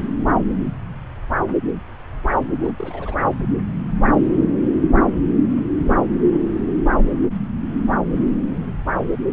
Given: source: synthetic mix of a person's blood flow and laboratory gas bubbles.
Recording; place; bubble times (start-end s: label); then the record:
Doppler ultrasound of blood flow; subclavian vein
2.54-2.73 s: bubbles
2.77-3.16 s: bubbles
From the record:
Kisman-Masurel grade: 211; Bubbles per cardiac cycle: several, 3 to 8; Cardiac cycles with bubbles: 1 to 10%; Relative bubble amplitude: barely perceptible (0.100 to 0.250); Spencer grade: 1 (occasional bubble signal discernible with the cardiac motion signal, with majority of cardiac periods free of bubbles); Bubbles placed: anywhere in the cardiac cycle